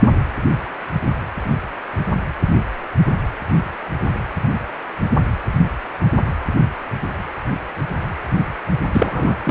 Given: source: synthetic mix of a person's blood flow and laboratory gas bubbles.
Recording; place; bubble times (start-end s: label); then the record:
Doppler ultrasound of blood flow; precordium
8.92-9.38 s: bubbles
9.44-9.51 s: bubbles
From the record:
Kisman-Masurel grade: 222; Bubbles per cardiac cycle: several, 3 to 8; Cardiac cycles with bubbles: 10 to 50%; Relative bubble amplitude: moderate (0.250 to 0.450); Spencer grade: 2 (many but less than half of the cardiac periods contain bubble signals, singularly or in groups); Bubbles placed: anywhere in the cardiac cycle